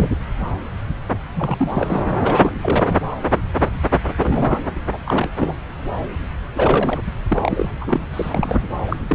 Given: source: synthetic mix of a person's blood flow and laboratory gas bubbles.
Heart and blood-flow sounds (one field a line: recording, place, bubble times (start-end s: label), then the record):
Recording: Doppler ultrasound of blood flow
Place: subclavian vein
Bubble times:
0.00-0.09 s: bubbles
1.35-2.00 s: bubbles
2.20-2.55 s: bubbles
2.61-2.97 s: bubbles
4.17-4.59 s: bubbles
4.91-4.98 s: bubbles
5.06-5.29 s: bubbles
5.37-5.55 s: bubbles
6.55-7.01 s: bubbles
7.29-7.69 s: bubbles
7.81-8.03 s: bubbles
8.13-8.62 s: bubbles
8.87-8.96 s: bubbles
9.08-9.15 s: bubbles
From the record:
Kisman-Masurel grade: 332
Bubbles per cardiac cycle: rolling drumbeat, 9 or more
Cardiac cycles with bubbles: 50 to 99%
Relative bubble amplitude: moderate (0.250 to 0.450)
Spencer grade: 3 (all of the cardiac periods contain showers or single bubble signals, but not dominating or overriding the cardiac motion signals)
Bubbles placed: anywhere in the cardiac cycle